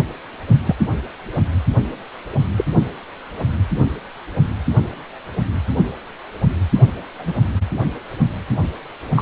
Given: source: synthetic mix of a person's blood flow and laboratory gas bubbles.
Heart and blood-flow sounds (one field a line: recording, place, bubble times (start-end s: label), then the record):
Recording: Doppler ultrasound of blood flow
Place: precordium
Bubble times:
0.66-0.75 s: bubbles
2.57-2.65 s: bubbles
7.19-7.33 s: bubbles
9.15-9.22 s: bubbles
From the record:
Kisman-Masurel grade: 123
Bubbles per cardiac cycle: 1 to 2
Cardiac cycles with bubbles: 10 to 50%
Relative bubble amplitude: loud (0.450 to 0.775)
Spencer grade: 2 (many but less than half of the cardiac periods contain bubble signals, singularly or in groups)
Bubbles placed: only in the low amplitude regions of the cardiac cycle